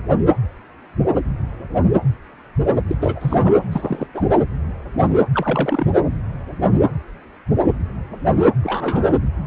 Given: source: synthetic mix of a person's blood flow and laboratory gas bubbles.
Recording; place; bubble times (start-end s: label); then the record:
Doppler ultrasound of blood flow; precordium
2.87-2.96 s: bubbles
3.00-3.58 s: bubbles
3.71-4.07 s: bubbles
4.14-4.24 s: bubbles
5.32-5.86 s: bubbles
8.63-9.13 s: bubbles
From the record:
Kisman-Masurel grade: 222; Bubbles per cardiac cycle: several, 3 to 8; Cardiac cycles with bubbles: 10 to 50%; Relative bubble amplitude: moderate (0.250 to 0.450); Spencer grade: 2 (many but less than half of the cardiac periods contain bubble signals, singularly or in groups); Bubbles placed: anywhere in the cardiac cycle